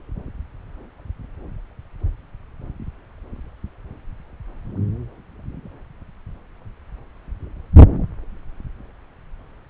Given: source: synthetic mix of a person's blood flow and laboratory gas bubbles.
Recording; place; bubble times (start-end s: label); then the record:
Doppler ultrasound of blood flow; subclavian vein
no bubbles
From the record:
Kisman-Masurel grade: 000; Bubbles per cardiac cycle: 0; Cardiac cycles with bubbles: 0%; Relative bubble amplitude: no bubbles discernible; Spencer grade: 0 (complete lack of bubble signals)